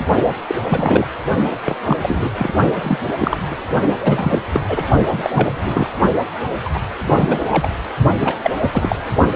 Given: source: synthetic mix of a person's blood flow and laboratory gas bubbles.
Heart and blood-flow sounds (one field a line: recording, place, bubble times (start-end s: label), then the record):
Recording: Doppler ultrasound of blood flow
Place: precordium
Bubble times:
0.47-0.55 s: bubbles
0.69-1.07 s: bubbles
1.50-1.56 s: bubbles
1.65-1.76 s: bubbles
1.85-1.97 s: bubbles
2.02-2.29 s: bubbles
2.38-2.53 s: bubbles
2.82-2.98 s: bubbles
3.06-3.13 s: bubbles
3.17-3.37 s: bubbles
3.50-3.55 s: bubbles
4.00-4.39 s: bubbles
4.54-4.60 s: bubbles
4.68-4.88 s: bubbles
5.12-5.30 s: bubbles
5.33-5.88 s: bubbles
6.64-6.70 s: bubbles
6.74-6.80 s: bubbles
7.05-7.69 s: bubbles
8.20-8.37 s: bubbles
8.44-8.51 s: bubbles
8.61-8.69 s: bubbles
8.73-8.96 s: bubbles
From the record:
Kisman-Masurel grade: 242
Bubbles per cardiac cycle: several, 3 to 8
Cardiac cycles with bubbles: 100%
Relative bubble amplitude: moderate (0.250 to 0.450)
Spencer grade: 3 (all of the cardiac periods contain showers or single bubble signals, but not dominating or overriding the cardiac motion signals)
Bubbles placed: only in the low amplitude regions of the cardiac cycle